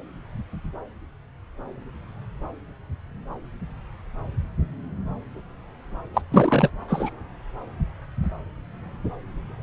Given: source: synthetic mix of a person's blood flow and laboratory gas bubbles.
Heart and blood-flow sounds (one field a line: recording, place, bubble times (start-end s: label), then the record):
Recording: Doppler ultrasound of blood flow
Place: subclavian vein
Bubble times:
6.14-6.21 s: bubbles
6.32-6.70 s: bubbles
6.88-7.11 s: bubbles
From the record:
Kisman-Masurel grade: 223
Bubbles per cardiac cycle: several, 3 to 8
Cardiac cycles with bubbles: 10 to 50%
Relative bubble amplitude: loud (0.450 to 0.775)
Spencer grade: 2 (many but less than half of the cardiac periods contain bubble signals, singularly or in groups)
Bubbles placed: anywhere in the cardiac cycle